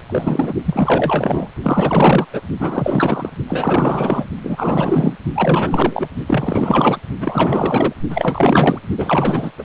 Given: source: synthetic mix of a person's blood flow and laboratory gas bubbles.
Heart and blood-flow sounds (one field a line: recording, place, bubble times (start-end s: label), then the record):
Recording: Doppler ultrasound of blood flow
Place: precordium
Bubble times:
0.09-0.53 s: bubbles
0.65-1.48 s: bubbles
1.62-2.25 s: bubbles
2.33-2.42 s: bubbles
2.59-3.29 s: bubbles
3.48-4.26 s: bubbles
4.43-5.14 s: bubbles
5.34-6.08 s: bubbles
6.26-6.97 s: bubbles
7.20-7.93 s: bubbles
8.10-8.79 s: bubbles
8.97-9.51 s: bubbles
9.58-9.63 s: bubbles
From the record:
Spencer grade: 4 (maximum detectable bubble signal sounding continuously throughout systole and diastole of every cardiac period, and overriding the amplitude of the normal cardiac signals)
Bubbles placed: only in the low amplitude regions of the cardiac cycle